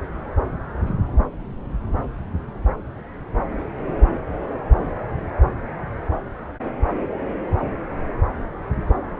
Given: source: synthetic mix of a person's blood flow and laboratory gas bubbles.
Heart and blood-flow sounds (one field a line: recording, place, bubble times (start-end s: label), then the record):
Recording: Doppler ultrasound of blood flow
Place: subclavian vein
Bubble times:
no bubbles
From the record:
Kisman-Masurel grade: 000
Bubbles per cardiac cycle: 0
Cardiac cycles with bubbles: 0%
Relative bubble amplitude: no bubbles discernible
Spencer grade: 0 (complete lack of bubble signals)